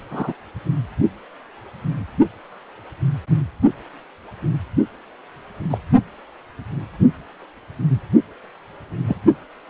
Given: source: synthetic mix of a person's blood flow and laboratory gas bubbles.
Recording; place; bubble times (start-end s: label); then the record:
Doppler ultrasound of blood flow; precordium
0.10-0.33 s: bubbles
5.70-5.78 s: bubbles
9.07-9.16 s: bubbles
From the record:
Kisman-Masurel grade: 122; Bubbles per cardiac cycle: 1 to 2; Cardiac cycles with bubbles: 10 to 50%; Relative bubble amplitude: moderate (0.250 to 0.450); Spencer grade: 2 (many but less than half of the cardiac periods contain bubble signals, singularly or in groups); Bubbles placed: only in the low amplitude regions of the cardiac cycle